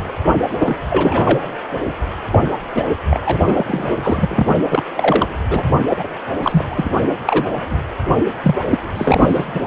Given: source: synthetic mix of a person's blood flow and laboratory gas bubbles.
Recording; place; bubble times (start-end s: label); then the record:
Doppler ultrasound of blood flow; precordium
0.60-0.76 s: bubbles
0.89-1.48 s: bubbles
2.30-2.39 s: bubbles
2.75-2.85 s: bubbles
3.10-3.20 s: bubbles
3.25-3.38 s: bubbles
3.46-4.46 s: bubbles
4.70-4.83 s: bubbles
4.96-5.28 s: bubbles
5.50-5.62 s: bubbles
5.89-6.08 s: bubbles
6.42-6.64 s: bubbles
6.70-6.89 s: bubbles
7.25-7.45 s: bubbles
7.70-7.76 s: bubbles
8.43-8.55 s: bubbles
8.69-8.79 s: bubbles
8.96-9.45 s: bubbles
9.54-9.62 s: bubbles
From the record:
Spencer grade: 3 (all of the cardiac periods contain showers or single bubble signals, but not dominating or overriding the cardiac motion signals); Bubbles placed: only in the low amplitude regions of the cardiac cycle